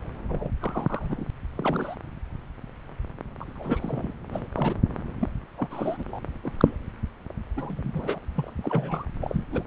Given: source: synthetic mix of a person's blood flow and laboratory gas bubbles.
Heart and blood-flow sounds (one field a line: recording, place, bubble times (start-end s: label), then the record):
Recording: Doppler ultrasound of blood flow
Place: subclavian vein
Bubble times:
0.28-0.51 s: bubbles
0.59-1.25 s: bubbles
1.55-1.96 s: bubbles
3.40-4.13 s: bubbles
4.31-4.48 s: bubbles
4.56-4.76 s: bubbles
5.19-5.29 s: bubbles
5.57-6.04 s: bubbles
6.07-6.23 s: bubbles
6.43-6.53 s: bubbles
6.58-6.77 s: bubbles
7.56-8.20 s: bubbles
8.35-8.53 s: bubbles
8.63-9.05 s: bubbles
9.21-9.46 s: bubbles
9.51-9.63 s: bubbles
From the record:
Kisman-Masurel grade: 232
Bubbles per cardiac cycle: several, 3 to 8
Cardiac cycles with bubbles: 50 to 99%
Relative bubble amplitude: moderate (0.250 to 0.450)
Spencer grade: 3 (all of the cardiac periods contain showers or single bubble signals, but not dominating or overriding the cardiac motion signals)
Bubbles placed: anywhere in the cardiac cycle